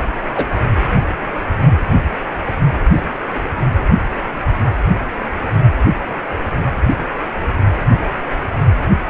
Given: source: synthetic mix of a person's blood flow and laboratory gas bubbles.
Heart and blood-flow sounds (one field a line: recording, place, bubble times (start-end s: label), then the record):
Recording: Doppler ultrasound of blood flow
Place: precordium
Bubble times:
0.34-0.46 s: bubbles
From the record:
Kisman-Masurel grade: 123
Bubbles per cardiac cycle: 1 to 2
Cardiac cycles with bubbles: 10 to 50%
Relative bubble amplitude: loud (0.450 to 0.775)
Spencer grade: 2 (many but less than half of the cardiac periods contain bubble signals, singularly or in groups)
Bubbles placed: anywhere in the cardiac cycle